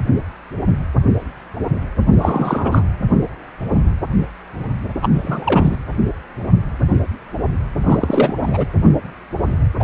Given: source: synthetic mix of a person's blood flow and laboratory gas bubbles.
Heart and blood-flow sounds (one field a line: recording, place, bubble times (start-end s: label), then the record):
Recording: Doppler ultrasound of blood flow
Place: precordium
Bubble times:
2.12-2.83 s: bubbles
5.01-5.09 s: bubbles
5.14-5.76 s: bubbles
7.83-8.33 s: bubbles
8.41-8.67 s: bubbles
9.79-9.84 s: bubbles
From the record:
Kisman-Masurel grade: 223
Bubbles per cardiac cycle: several, 3 to 8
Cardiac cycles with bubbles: 10 to 50%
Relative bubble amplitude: loud (0.450 to 0.775)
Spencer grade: 2 (many but less than half of the cardiac periods contain bubble signals, singularly or in groups)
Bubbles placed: anywhere in the cardiac cycle